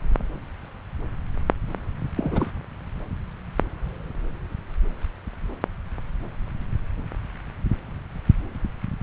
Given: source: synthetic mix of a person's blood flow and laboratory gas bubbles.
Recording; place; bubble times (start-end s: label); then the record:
Doppler ultrasound of blood flow; subclavian vein
2.16-2.52 s: bubbles
From the record:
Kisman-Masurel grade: 211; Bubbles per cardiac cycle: several, 3 to 8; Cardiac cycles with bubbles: 1 to 10%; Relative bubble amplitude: barely perceptible (0.100 to 0.250); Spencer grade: 1 (occasional bubble signal discernible with the cardiac motion signal, with majority of cardiac periods free of bubbles); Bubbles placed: anywhere in the cardiac cycle